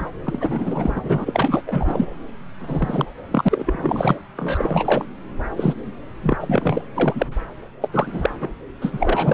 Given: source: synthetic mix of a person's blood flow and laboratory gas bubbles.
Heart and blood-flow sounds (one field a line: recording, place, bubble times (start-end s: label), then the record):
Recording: Doppler ultrasound of blood flow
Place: subclavian vein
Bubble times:
0.00-0.07 s: bubbles
0.25-1.62 s: bubbles
1.67-2.06 s: bubbles
2.60-3.05 s: bubbles
3.31-4.21 s: bubbles
4.37-5.05 s: bubbles
5.57-5.74 s: bubbles
6.22-6.37 s: bubbles
6.40-6.82 s: bubbles
6.96-7.34 s: bubbles
7.82-7.88 s: bubbles
7.92-8.30 s: bubbles
8.39-8.49 s: bubbles
8.81-8.90 s: bubbles
8.92-9.34 s: bubbles
From the record:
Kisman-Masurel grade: 342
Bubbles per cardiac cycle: rolling drumbeat, 9 or more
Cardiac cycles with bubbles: 100%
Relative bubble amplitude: moderate (0.250 to 0.450)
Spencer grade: 3 (all of the cardiac periods contain showers or single bubble signals, but not dominating or overriding the cardiac motion signals)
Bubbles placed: anywhere in the cardiac cycle